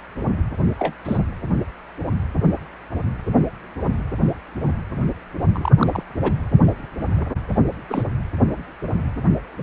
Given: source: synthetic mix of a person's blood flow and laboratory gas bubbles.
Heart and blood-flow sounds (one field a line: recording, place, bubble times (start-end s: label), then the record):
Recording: Doppler ultrasound of blood flow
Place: precordium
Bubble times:
0.79-0.94 s: bubbles
1.05-1.18 s: bubbles
5.53-5.71 s: bubbles
5.77-6.03 s: bubbles
6.22-6.34 s: bubbles
7.89-8.08 s: bubbles
From the record:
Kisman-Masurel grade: 122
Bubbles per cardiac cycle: 1 to 2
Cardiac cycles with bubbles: 10 to 50%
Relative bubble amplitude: moderate (0.250 to 0.450)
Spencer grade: 2 (many but less than half of the cardiac periods contain bubble signals, singularly or in groups)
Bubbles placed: only in the low amplitude regions of the cardiac cycle